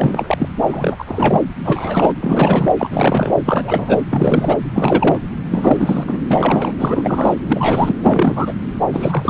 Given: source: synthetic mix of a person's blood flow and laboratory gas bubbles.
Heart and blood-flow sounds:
Doppler ultrasound of blood flow; subclavian vein
0.00-0.49 s: bubbles
0.67-1.04 s: bubbles
1.07-1.40 s: bubbles
1.65-2.11 s: bubbles
2.20-2.72 s: bubbles
2.78-3.37 s: bubbles
3.45-4.03 s: bubbles
4.10-4.58 s: bubbles
4.74-5.21 s: bubbles
5.50-6.04 s: bubbles
6.07-6.19 s: bubbles
6.30-6.73 s: bubbles
6.79-7.34 s: bubbles
7.48-7.95 s: bubbles
8.01-8.54 s: bubbles
8.93-9.30 s: bubbles
From the record:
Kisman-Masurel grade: 343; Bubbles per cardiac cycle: rolling drumbeat, 9 or more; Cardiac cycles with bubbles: 100%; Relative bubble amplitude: loud (0.450 to 0.775); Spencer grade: 3 (all of the cardiac periods contain showers or single bubble signals, but not dominating or overriding the cardiac motion signals); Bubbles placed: anywhere in the cardiac cycle

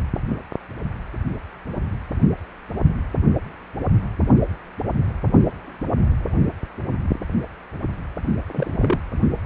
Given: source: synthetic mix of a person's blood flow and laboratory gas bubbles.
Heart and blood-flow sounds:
Doppler ultrasound of blood flow; precordium
8.46-8.97 s: bubbles
From the record:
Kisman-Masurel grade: 122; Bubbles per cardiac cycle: 1 to 2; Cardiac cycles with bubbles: 10 to 50%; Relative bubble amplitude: moderate (0.250 to 0.450); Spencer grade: 2 (many but less than half of the cardiac periods contain bubble signals, singularly or in groups); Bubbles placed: anywhere in the cardiac cycle

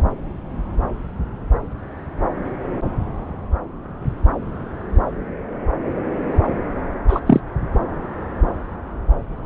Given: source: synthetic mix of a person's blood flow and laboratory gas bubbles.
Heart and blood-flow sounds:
Doppler ultrasound of blood flow; subclavian vein
7.08-7.20 s: bubbles
7.26-7.40 s: bubbles
From the record:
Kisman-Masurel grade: 113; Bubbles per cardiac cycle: 1 to 2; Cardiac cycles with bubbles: 1 to 10%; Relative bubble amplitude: loud (0.450 to 0.775); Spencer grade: 1 (occasional bubble signal discernible with the cardiac motion signal, with majority of cardiac periods free of bubbles); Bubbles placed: anywhere in the cardiac cycle

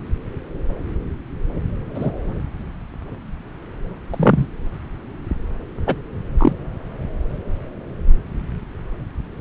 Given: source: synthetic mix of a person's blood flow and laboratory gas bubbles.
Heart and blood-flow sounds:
Doppler ultrasound of blood flow; subclavian vein
1.95-2.11 s: bubbles
4.10-4.46 s: bubbles
5.87-5.95 s: bubbles
6.38-6.53 s: bubbles
From the record:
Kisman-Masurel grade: 123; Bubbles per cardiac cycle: 1 to 2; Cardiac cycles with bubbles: 10 to 50%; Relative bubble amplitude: loud (0.450 to 0.775); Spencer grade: 2 (many but less than half of the cardiac periods contain bubble signals, singularly or in groups); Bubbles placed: anywhere in the cardiac cycle

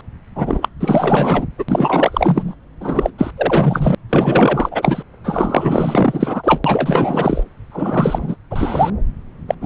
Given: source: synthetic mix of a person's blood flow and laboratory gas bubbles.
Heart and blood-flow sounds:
Doppler ultrasound of blood flow; subclavian vein
0.35-0.69 s: bubbles
0.79-1.45 s: bubbles
1.57-1.64 s: bubbles
1.68-2.55 s: bubbles
2.80-3.10 s: bubbles
3.18-3.31 s: bubbles
3.37-3.95 s: bubbles
4.09-5.03 s: bubbles
5.24-6.61 s: bubbles
6.64-7.44 s: bubbles
7.71-8.36 s: bubbles
8.50-8.90 s: bubbles
9.48-9.54 s: bubbles
9.60-9.66 s: bubbles
From the record:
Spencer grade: 4 (maximum detectable bubble signal sounding continuously throughout systole and diastole of every cardiac period, and overriding the amplitude of the normal cardiac signals); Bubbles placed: anywhere in the cardiac cycle

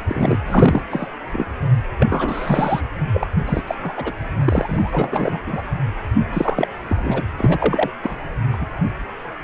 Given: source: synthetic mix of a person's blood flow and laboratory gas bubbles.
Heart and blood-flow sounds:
Doppler ultrasound of blood flow; precordium
0.07-0.39 s: bubbles
0.44-0.82 s: bubbles
0.90-1.08 s: bubbles
1.31-1.46 s: bubbles
1.99-2.81 s: bubbles
3.13-3.27 s: bubbles
3.47-3.61 s: bubbles
3.67-3.75 s: bubbles
3.83-3.93 s: bubbles
3.97-4.12 s: bubbles
4.44-5.39 s: bubbles
5.46-5.62 s: bubbles
6.33-6.68 s: bubbles
6.88-7.22 s: bubbles
7.36-7.90 s: bubbles
8.03-8.17 s: bubbles
8.53-8.57 s: bubbles
8.60-8.66 s: bubbles
From the record:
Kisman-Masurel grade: 333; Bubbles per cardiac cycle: rolling drumbeat, 9 or more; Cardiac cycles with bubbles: 50 to 99%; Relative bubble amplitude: loud (0.450 to 0.775); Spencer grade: 3 (all of the cardiac periods contain showers or single bubble signals, but not dominating or overriding the cardiac motion signals); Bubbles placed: anywhere in the cardiac cycle

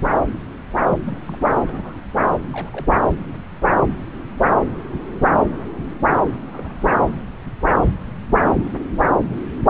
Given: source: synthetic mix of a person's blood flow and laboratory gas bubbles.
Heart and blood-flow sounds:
Doppler ultrasound of blood flow; subclavian vein
0.00-0.13 s: bubbles
1.00-1.20 s: bubbles
1.23-1.39 s: bubbles
1.45-1.57 s: bubbles
1.66-1.98 s: bubbles
2.25-2.35 s: bubbles
2.49-2.70 s: bubbles
2.72-3.00 s: bubbles
6.47-7.09 s: bubbles
From the record:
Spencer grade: 2 (many but less than half of the cardiac periods contain bubble signals, singularly or in groups); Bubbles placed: anywhere in the cardiac cycle

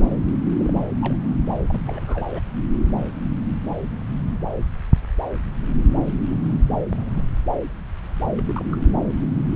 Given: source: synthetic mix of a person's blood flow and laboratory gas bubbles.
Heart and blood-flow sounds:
Doppler ultrasound of blood flow; subclavian vein
0.59-0.81 s: bubbles
1.01-1.16 s: bubbles
1.69-2.29 s: bubbles
2.33-2.40 s: bubbles
6.29-6.62 s: bubbles
6.79-7.24 s: bubbles
8.38-8.42 s: bubbles
8.48-8.65 s: bubbles
8.71-8.77 s: bubbles
From the record:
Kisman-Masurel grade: 221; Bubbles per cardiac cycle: several, 3 to 8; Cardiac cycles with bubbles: 10 to 50%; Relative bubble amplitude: barely perceptible (0.100 to 0.250); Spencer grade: 2 (many but less than half of the cardiac periods contain bubble signals, singularly or in groups); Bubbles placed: anywhere in the cardiac cycle

